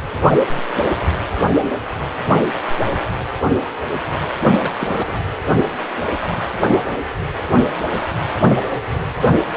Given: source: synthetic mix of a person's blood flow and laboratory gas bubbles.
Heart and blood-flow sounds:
Doppler ultrasound of blood flow; precordium
4.56-4.71 s: bubbles
4.80-5.17 s: bubbles
From the record:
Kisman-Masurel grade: 212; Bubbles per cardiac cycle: several, 3 to 8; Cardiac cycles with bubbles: 1 to 10%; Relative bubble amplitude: moderate (0.250 to 0.450); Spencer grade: 1 (occasional bubble signal discernible with the cardiac motion signal, with majority of cardiac periods free of bubbles); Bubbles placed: anywhere in the cardiac cycle

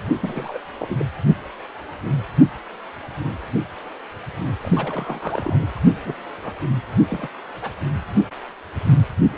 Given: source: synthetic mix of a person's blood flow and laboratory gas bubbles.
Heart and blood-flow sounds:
Doppler ultrasound of blood flow; precordium
0.21-0.59 s: bubbles
0.79-1.05 s: bubbles
4.62-5.67 s: bubbles
5.76-5.81 s: bubbles
6.04-6.15 s: bubbles
6.43-6.51 s: bubbles
7.09-7.28 s: bubbles
7.62-7.71 s: bubbles
From the record:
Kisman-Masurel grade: 221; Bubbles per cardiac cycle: several, 3 to 8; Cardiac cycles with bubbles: 10 to 50%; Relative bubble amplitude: barely perceptible (0.100 to 0.250); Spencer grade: 2 (many but less than half of the cardiac periods contain bubble signals, singularly or in groups); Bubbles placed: anywhere in the cardiac cycle

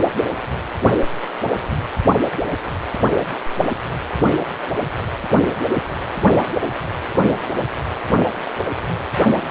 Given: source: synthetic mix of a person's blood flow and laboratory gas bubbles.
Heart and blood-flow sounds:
Doppler ultrasound of blood flow; precordium
no bubbles
From the record:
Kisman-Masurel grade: 000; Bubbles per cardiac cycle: 0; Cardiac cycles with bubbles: 0%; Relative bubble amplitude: no bubbles discernible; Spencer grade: 0 (complete lack of bubble signals)

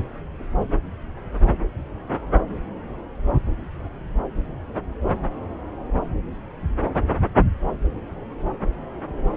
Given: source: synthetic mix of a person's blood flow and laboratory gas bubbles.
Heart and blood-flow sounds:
Doppler ultrasound of blood flow; subclavian vein
no bubbles
From the record:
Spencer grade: 0 (complete lack of bubble signals)

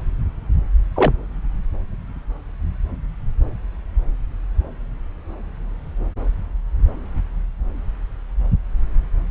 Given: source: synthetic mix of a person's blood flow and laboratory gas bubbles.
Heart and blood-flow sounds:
Doppler ultrasound of blood flow; subclavian vein
0.96-1.11 s: bubbles
From the record:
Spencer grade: 1 (occasional bubble signal discernible with the cardiac motion signal, with majority of cardiac periods free of bubbles); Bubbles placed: anywhere in the cardiac cycle

